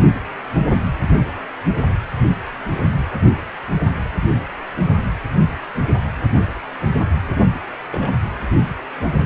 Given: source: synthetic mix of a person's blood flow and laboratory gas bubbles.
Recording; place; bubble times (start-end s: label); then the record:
Doppler ultrasound of blood flow; precordium
1.17-1.22 s: bubbles
7.92-8.11 s: bubbles
From the record:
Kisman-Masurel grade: 121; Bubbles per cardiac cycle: 1 to 2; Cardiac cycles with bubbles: 10 to 50%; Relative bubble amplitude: barely perceptible (0.100 to 0.250); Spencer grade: 2 (many but less than half of the cardiac periods contain bubble signals, singularly or in groups); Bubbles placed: anywhere in the cardiac cycle